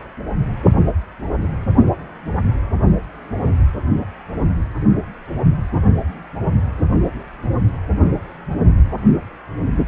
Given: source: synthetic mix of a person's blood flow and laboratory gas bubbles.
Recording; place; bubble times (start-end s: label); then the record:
Doppler ultrasound of blood flow; precordium
no bubbles
From the record:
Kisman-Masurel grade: 000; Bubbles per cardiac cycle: 0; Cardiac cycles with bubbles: 0%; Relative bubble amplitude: no bubbles discernible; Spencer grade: 0 (complete lack of bubble signals)